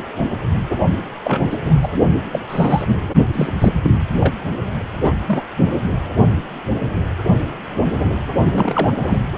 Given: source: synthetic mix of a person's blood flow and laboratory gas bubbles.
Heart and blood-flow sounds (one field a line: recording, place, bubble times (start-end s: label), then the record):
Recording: Doppler ultrasound of blood flow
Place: precordium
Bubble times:
1.25-1.43 s: bubbles
1.50-1.58 s: bubbles
1.65-1.74 s: bubbles
1.82-1.91 s: bubbles
2.32-2.39 s: bubbles
2.48-3.08 s: bubbles
3.33-3.52 s: bubbles
3.61-3.74 s: bubbles
3.83-3.90 s: bubbles
4.20-4.35 s: bubbles
4.96-5.12 s: bubbles
5.26-5.43 s: bubbles
8.52-8.91 s: bubbles
9.03-9.19 s: bubbles
From the record:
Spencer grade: 3 (all of the cardiac periods contain showers or single bubble signals, but not dominating or overriding the cardiac motion signals)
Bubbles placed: only in the low amplitude regions of the cardiac cycle